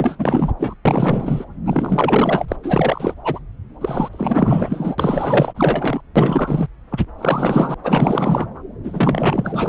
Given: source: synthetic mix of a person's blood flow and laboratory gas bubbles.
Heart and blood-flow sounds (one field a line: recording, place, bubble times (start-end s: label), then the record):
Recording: Doppler ultrasound of blood flow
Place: subclavian vein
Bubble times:
0.00-0.52 s: bubbles
0.58-0.75 s: bubbles
0.85-1.45 s: bubbles
1.66-2.46 s: bubbles
2.48-2.56 s: bubbles
2.63-3.15 s: bubbles
3.24-3.39 s: bubbles
3.81-4.09 s: bubbles
4.12-4.96 s: bubbles
4.98-5.53 s: bubbles
5.56-6.01 s: bubbles
6.16-6.67 s: bubbles
6.90-7.06 s: bubbles
7.18-7.75 s: bubbles
7.83-8.46 s: bubbles
8.83-9.69 s: bubbles
From the record:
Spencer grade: 4 (maximum detectable bubble signal sounding continuously throughout systole and diastole of every cardiac period, and overriding the amplitude of the normal cardiac signals)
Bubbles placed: anywhere in the cardiac cycle